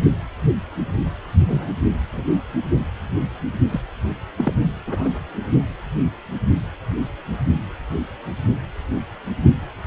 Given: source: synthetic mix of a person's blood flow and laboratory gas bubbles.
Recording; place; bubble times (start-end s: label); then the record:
Doppler ultrasound of blood flow; precordium
1.47-1.72 s: bubbles
2.12-2.24 s: bubbles
3.72-3.80 s: bubbles
4.38-4.53 s: bubbles
4.87-5.08 s: bubbles
From the record:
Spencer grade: 2 (many but less than half of the cardiac periods contain bubble signals, singularly or in groups); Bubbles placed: only in the low amplitude regions of the cardiac cycle